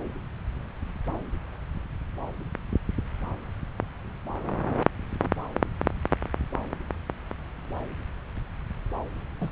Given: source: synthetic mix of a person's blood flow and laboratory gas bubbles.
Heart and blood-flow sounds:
Doppler ultrasound of blood flow; subclavian vein
9.40-9.49 s: bubbles
From the record:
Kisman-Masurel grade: 112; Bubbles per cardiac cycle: 1 to 2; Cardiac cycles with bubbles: 1 to 10%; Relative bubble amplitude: moderate (0.250 to 0.450); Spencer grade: 1 (occasional bubble signal discernible with the cardiac motion signal, with majority of cardiac periods free of bubbles); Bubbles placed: anywhere in the cardiac cycle

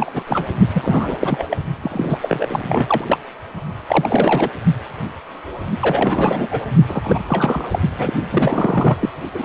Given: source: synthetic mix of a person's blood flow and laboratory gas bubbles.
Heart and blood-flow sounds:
Doppler ultrasound of blood flow; precordium
0.00-0.10 s: bubbles
0.13-0.23 s: bubbles
0.27-0.47 s: bubbles
0.74-1.18 s: bubbles
1.21-1.46 s: bubbles
1.50-1.57 s: bubbles
1.82-3.18 s: bubbles
3.87-4.50 s: bubbles
5.79-6.47 s: bubbles
6.50-6.72 s: bubbles
6.88-7.25 s: bubbles
7.27-7.68 s: bubbles
7.71-7.79 s: bubbles
7.97-8.13 s: bubbles
8.31-9.09 s: bubbles
9.35-9.45 s: bubbles
From the record:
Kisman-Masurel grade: 333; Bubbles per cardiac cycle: rolling drumbeat, 9 or more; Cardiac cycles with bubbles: 50 to 99%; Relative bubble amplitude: loud (0.450 to 0.775); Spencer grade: 3 (all of the cardiac periods contain showers or single bubble signals, but not dominating or overriding the cardiac motion signals); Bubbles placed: only in the low amplitude regions of the cardiac cycle

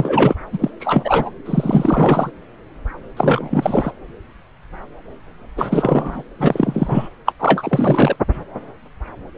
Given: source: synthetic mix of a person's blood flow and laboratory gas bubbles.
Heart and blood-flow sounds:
Doppler ultrasound of blood flow; subclavian vein
0.00-0.35 s: bubbles
0.52-0.71 s: bubbles
0.80-1.30 s: bubbles
1.45-2.31 s: bubbles
3.17-3.92 s: bubbles
5.57-6.25 s: bubbles
6.38-7.09 s: bubbles
7.25-7.33 s: bubbles
7.39-8.16 s: bubbles
From the record:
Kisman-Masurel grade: 333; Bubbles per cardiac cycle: rolling drumbeat, 9 or more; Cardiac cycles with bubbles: 50 to 99%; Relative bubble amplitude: loud (0.450 to 0.775); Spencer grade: 3 (all of the cardiac periods contain showers or single bubble signals, but not dominating or overriding the cardiac motion signals); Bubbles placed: anywhere in the cardiac cycle

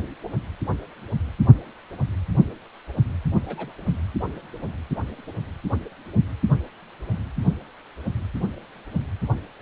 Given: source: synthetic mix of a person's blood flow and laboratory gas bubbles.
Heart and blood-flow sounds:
Doppler ultrasound of blood flow; precordium
3.43-3.72 s: bubbles
From the record:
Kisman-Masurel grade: 111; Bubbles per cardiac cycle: 1 to 2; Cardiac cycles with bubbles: 1 to 10%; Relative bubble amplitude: barely perceptible (0.100 to 0.250); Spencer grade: 1 (occasional bubble signal discernible with the cardiac motion signal, with majority of cardiac periods free of bubbles); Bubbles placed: anywhere in the cardiac cycle

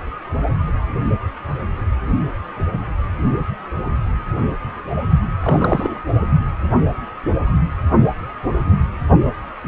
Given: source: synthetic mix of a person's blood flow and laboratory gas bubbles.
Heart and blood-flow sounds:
Doppler ultrasound of blood flow; precordium
5.43-6.00 s: bubbles
From the record:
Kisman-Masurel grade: 212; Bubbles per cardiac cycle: several, 3 to 8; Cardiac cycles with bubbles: 1 to 10%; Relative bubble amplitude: moderate (0.250 to 0.450); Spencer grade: 1 (occasional bubble signal discernible with the cardiac motion signal, with majority of cardiac periods free of bubbles); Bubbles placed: anywhere in the cardiac cycle

